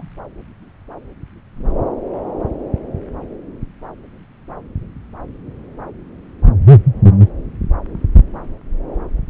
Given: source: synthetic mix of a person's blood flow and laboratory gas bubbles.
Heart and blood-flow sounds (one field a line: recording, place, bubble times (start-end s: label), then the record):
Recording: Doppler ultrasound of blood flow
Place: subclavian vein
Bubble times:
0.00-0.09 s: bubbles
From the record:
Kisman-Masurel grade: 211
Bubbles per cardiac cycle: several, 3 to 8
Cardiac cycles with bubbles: 1 to 10%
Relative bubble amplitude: barely perceptible (0.100 to 0.250)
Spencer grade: 1 (occasional bubble signal discernible with the cardiac motion signal, with majority of cardiac periods free of bubbles)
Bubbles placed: anywhere in the cardiac cycle